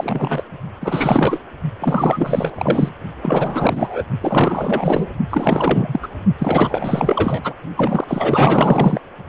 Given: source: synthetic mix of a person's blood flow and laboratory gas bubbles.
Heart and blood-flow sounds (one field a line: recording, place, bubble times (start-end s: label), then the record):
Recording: Doppler ultrasound of blood flow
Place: precordium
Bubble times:
0.00-0.43 s: bubbles
0.80-1.40 s: bubbles
1.81-2.92 s: bubbles
3.22-4.03 s: bubbles
4.21-5.07 s: bubbles
5.29-6.08 s: bubbles
6.38-7.54 s: bubbles
7.77-8.04 s: bubbles
8.08-9.01 s: bubbles
From the record:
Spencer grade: 4 (maximum detectable bubble signal sounding continuously throughout systole and diastole of every cardiac period, and overriding the amplitude of the normal cardiac signals)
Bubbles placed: only in the low amplitude regions of the cardiac cycle